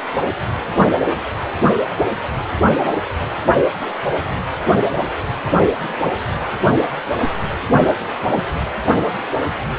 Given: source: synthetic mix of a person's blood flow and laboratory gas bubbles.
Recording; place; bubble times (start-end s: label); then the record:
Doppler ultrasound of blood flow; precordium
7.72-7.95 s: bubbles
8.32-8.41 s: bubbles
From the record:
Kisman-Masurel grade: 112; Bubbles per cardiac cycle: 1 to 2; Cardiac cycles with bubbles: 1 to 10%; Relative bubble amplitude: moderate (0.250 to 0.450); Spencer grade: 1 (occasional bubble signal discernible with the cardiac motion signal, with majority of cardiac periods free of bubbles); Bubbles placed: anywhere in the cardiac cycle